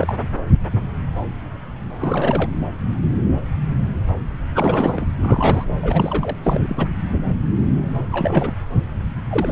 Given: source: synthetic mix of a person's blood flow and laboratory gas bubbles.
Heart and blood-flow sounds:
Doppler ultrasound of blood flow; subclavian vein
0.00-0.15 s: bubbles
2.00-2.50 s: bubbles
4.54-5.06 s: bubbles
5.17-5.65 s: bubbles
5.83-6.37 s: bubbles
6.44-6.90 s: bubbles
8.12-8.53 s: bubbles
9.29-9.52 s: bubbles
From the record:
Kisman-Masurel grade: 332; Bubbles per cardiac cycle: rolling drumbeat, 9 or more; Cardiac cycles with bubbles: 50 to 99%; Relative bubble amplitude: moderate (0.250 to 0.450); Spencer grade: 3 (all of the cardiac periods contain showers or single bubble signals, but not dominating or overriding the cardiac motion signals); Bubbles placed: anywhere in the cardiac cycle

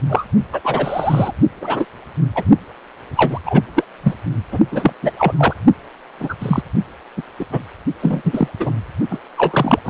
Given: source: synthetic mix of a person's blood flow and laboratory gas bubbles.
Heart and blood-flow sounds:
Doppler ultrasound of blood flow; precordium
0.09-0.25 s: bubbles
0.52-0.60 s: bubbles
0.63-1.32 s: bubbles
1.61-1.85 s: bubbles
2.34-2.44 s: bubbles
3.15-3.39 s: bubbles
3.46-3.62 s: bubbles
3.75-3.84 s: bubbles
4.03-4.14 s: bubbles
4.52-4.59 s: bubbles
4.71-4.93 s: bubbles
5.02-5.11 s: bubbles
5.18-5.33 s: bubbles
5.37-5.54 s: bubbles
6.19-6.35 s: bubbles
6.39-6.62 s: bubbles
7.17-7.22 s: bubbles
7.38-7.46 s: bubbles
7.52-7.63 s: bubbles
8.02-8.48 s: bubbles
8.60-8.74 s: bubbles
9.09-9.19 s: bubbles
9.38-9.79 s: bubbles
9.85-9.90 s: bubbles
From the record:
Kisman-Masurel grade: 243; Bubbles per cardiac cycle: several, 3 to 8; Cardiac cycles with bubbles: 100%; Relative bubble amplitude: loud (0.450 to 0.775); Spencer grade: 3 (all of the cardiac periods contain showers or single bubble signals, but not dominating or overriding the cardiac motion signals); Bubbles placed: only in the low amplitude regions of the cardiac cycle

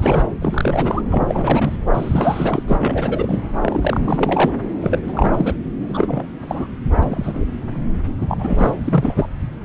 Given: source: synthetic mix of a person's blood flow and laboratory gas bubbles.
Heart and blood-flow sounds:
Doppler ultrasound of blood flow; subclavian vein
0.00-0.29 s: bubbles
0.41-1.02 s: bubbles
1.10-1.77 s: bubbles
1.94-2.63 s: bubbles
2.67-3.40 s: bubbles
3.61-4.53 s: bubbles
4.81-4.99 s: bubbles
5.07-5.54 s: bubbles
5.81-6.45 s: bubbles
6.47-6.67 s: bubbles
6.83-6.94 s: bubbles
7.03-7.45 s: bubbles
8.21-8.74 s: bubbles
8.84-9.29 s: bubbles
From the record:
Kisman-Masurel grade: 342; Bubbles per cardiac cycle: rolling drumbeat, 9 or more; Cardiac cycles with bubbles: 100%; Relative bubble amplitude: moderate (0.250 to 0.450); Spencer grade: 3 (all of the cardiac periods contain showers or single bubble signals, but not dominating or overriding the cardiac motion signals); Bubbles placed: anywhere in the cardiac cycle

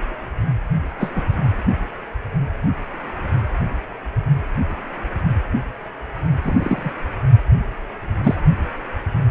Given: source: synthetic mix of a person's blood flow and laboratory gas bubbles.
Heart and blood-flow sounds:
Doppler ultrasound of blood flow; precordium
1.00-1.11 s: bubbles
1.15-1.23 s: bubbles
6.43-6.92 s: bubbles
8.23-8.35 s: bubbles
From the record:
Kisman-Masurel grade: 122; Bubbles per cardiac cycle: 1 to 2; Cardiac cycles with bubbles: 10 to 50%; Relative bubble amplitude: moderate (0.250 to 0.450); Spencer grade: 2 (many but less than half of the cardiac periods contain bubble signals, singularly or in groups); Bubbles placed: only in the low amplitude regions of the cardiac cycle

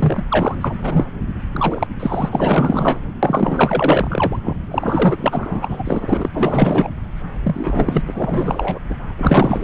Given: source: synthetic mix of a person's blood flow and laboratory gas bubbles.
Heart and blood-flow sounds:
Doppler ultrasound of blood flow; subclavian vein
0.00-0.24 s: bubbles
0.29-0.55 s: bubbles
0.60-1.05 s: bubbles
1.52-1.87 s: bubbles
2.00-2.29 s: bubbles
2.31-2.98 s: bubbles
3.23-4.39 s: bubbles
4.44-4.57 s: bubbles
4.71-6.29 s: bubbles
6.34-6.91 s: bubbles
7.44-8.03 s: bubbles
8.07-8.79 s: bubbles
8.89-8.96 s: bubbles
9.18-9.64 s: bubbles
From the record:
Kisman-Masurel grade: 444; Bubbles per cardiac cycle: continuous sound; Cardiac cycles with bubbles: 100%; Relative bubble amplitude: maximal (0.775 to 0.999); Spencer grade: 4 (maximum detectable bubble signal sounding continuously throughout systole and diastole of every cardiac period, and overriding the amplitude of the normal cardiac signals); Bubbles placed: anywhere in the cardiac cycle

